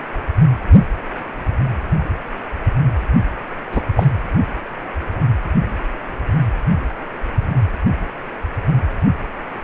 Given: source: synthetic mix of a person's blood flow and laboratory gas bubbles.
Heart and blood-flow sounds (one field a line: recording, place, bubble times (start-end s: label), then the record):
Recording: Doppler ultrasound of blood flow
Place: precordium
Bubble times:
3.71-3.81 s: bubbles
3.96-4.06 s: bubbles
From the record:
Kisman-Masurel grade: 113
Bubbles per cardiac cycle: 1 to 2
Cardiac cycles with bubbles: 1 to 10%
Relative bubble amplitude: loud (0.450 to 0.775)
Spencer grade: 1 (occasional bubble signal discernible with the cardiac motion signal, with majority of cardiac periods free of bubbles)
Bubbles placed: anywhere in the cardiac cycle